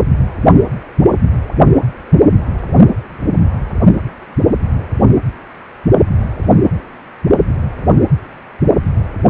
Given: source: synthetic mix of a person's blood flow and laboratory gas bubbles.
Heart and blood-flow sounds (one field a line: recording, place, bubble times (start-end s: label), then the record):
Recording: Doppler ultrasound of blood flow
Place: precordium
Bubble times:
no bubbles
From the record:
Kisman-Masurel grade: 000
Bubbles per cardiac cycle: 0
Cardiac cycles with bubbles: 0%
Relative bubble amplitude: no bubbles discernible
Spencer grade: 0 (complete lack of bubble signals)